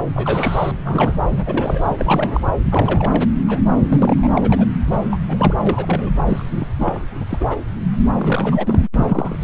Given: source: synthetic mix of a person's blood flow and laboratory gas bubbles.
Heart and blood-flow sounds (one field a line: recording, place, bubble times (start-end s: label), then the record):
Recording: Doppler ultrasound of blood flow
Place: subclavian vein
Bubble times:
0.14-0.72 s: bubbles
0.84-1.19 s: bubbles
1.36-2.47 s: bubbles
2.71-3.23 s: bubbles
3.48-3.59 s: bubbles
3.88-4.28 s: bubbles
4.37-4.66 s: bubbles
4.87-5.00 s: bubbles
5.11-5.19 s: bubbles
5.28-5.54 s: bubbles
5.66-6.11 s: bubbles
6.27-6.67 s: bubbles
6.78-7.01 s: bubbles
7.20-7.25 s: bubbles
7.29-7.45 s: bubbles
7.50-7.57 s: bubbles
8.20-8.85 s: bubbles
8.96-9.37 s: bubbles
From the record:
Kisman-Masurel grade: 242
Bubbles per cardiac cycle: several, 3 to 8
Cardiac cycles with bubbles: 100%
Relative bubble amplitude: moderate (0.250 to 0.450)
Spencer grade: 3 (all of the cardiac periods contain showers or single bubble signals, but not dominating or overriding the cardiac motion signals)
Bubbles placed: anywhere in the cardiac cycle